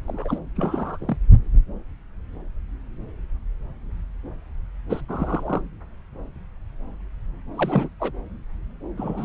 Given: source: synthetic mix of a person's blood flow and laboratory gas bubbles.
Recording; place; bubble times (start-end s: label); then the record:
Doppler ultrasound of blood flow; subclavian vein
0.08-0.38 s: bubbles
0.56-1.17 s: bubbles
4.89-5.01 s: bubbles
5.08-5.61 s: bubbles
7.56-7.89 s: bubbles
8.00-8.12 s: bubbles
8.97-9.25 s: bubbles
From the record:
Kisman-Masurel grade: 221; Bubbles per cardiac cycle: several, 3 to 8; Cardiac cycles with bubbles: 10 to 50%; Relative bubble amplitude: barely perceptible (0.100 to 0.250); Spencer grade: 2 (many but less than half of the cardiac periods contain bubble signals, singularly or in groups); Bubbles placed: anywhere in the cardiac cycle